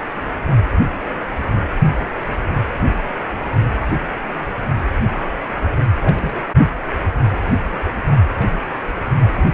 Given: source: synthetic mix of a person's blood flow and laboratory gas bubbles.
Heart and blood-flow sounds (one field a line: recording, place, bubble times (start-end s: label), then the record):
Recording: Doppler ultrasound of blood flow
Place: precordium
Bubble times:
6.00-6.42 s: bubbles
8.39-8.45 s: bubbles
9.33-9.46 s: bubbles
From the record:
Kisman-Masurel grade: 121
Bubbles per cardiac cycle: 1 to 2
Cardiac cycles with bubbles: 10 to 50%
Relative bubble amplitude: barely perceptible (0.100 to 0.250)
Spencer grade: 2 (many but less than half of the cardiac periods contain bubble signals, singularly or in groups)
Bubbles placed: only in the low amplitude regions of the cardiac cycle